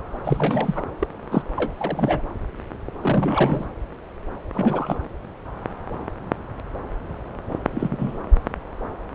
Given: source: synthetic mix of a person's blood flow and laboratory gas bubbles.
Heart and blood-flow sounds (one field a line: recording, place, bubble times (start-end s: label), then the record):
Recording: Doppler ultrasound of blood flow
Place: subclavian vein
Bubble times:
0.25-0.84 s: bubbles
0.99-1.07 s: bubbles
1.31-1.42 s: bubbles
1.56-1.72 s: bubbles
1.78-2.22 s: bubbles
3.00-3.65 s: bubbles
4.53-4.97 s: bubbles
7.71-8.19 s: bubbles
From the record:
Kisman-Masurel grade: 222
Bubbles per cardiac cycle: several, 3 to 8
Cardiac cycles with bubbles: 10 to 50%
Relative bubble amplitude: moderate (0.250 to 0.450)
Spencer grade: 2 (many but less than half of the cardiac periods contain bubble signals, singularly or in groups)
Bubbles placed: anywhere in the cardiac cycle